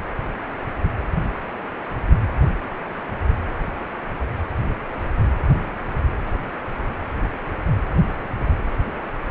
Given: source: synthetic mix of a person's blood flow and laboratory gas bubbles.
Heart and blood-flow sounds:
Doppler ultrasound of blood flow; precordium
no bubbles
From the record:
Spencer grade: 0 (complete lack of bubble signals)

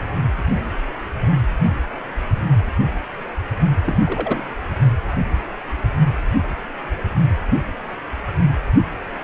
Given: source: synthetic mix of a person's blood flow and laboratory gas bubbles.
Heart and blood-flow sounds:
Doppler ultrasound of blood flow; precordium
3.84-3.98 s: bubbles
4.04-4.47 s: bubbles
From the record:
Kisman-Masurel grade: 211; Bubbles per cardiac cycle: several, 3 to 8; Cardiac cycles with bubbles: 1 to 10%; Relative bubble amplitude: barely perceptible (0.100 to 0.250); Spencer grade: 1 (occasional bubble signal discernible with the cardiac motion signal, with majority of cardiac periods free of bubbles); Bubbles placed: only in the low amplitude regions of the cardiac cycle

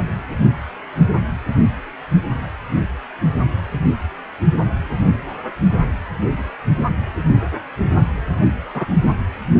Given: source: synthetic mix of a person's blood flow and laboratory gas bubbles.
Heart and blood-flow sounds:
Doppler ultrasound of blood flow; precordium
8.73-8.86 s: bubbles
From the record:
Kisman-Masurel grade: 123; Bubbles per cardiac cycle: 1 to 2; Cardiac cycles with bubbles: 10 to 50%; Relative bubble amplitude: loud (0.450 to 0.775); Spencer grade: 2 (many but less than half of the cardiac periods contain bubble signals, singularly or in groups); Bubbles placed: only in the low amplitude regions of the cardiac cycle

